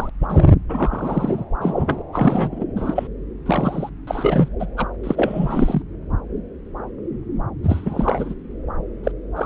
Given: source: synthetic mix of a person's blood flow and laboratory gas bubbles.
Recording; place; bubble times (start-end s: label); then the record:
Doppler ultrasound of blood flow; subclavian vein
0.00-0.10 s: bubbles
0.21-0.27 s: bubbles
0.29-0.51 s: bubbles
0.69-1.44 s: bubbles
1.60-2.02 s: bubbles
2.13-2.65 s: bubbles
2.76-3.07 s: bubbles
3.46-3.89 s: bubbles
4.07-4.49 s: bubbles
4.59-4.66 s: bubbles
4.76-4.87 s: bubbles
5.03-5.82 s: bubbles
7.63-8.34 s: bubbles
9.04-9.12 s: bubbles
9.36-9.46 s: bubbles
From the record:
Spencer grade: 3 (all of the cardiac periods contain showers or single bubble signals, but not dominating or overriding the cardiac motion signals); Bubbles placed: anywhere in the cardiac cycle